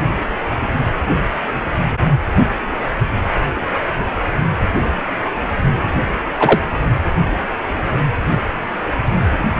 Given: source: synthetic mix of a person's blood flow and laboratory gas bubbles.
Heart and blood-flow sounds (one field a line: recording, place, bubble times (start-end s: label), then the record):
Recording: Doppler ultrasound of blood flow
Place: precordium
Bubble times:
6.39-6.62 s: bubbles
From the record:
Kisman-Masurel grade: 113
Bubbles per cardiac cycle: 1 to 2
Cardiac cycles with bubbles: 1 to 10%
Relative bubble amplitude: loud (0.450 to 0.775)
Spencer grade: 1 (occasional bubble signal discernible with the cardiac motion signal, with majority of cardiac periods free of bubbles)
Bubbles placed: anywhere in the cardiac cycle